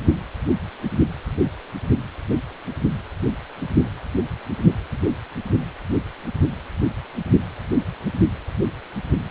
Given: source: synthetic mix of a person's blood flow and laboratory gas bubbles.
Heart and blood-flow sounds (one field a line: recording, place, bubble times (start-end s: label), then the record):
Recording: Doppler ultrasound of blood flow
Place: precordium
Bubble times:
no bubbles
From the record:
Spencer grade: 0 (complete lack of bubble signals)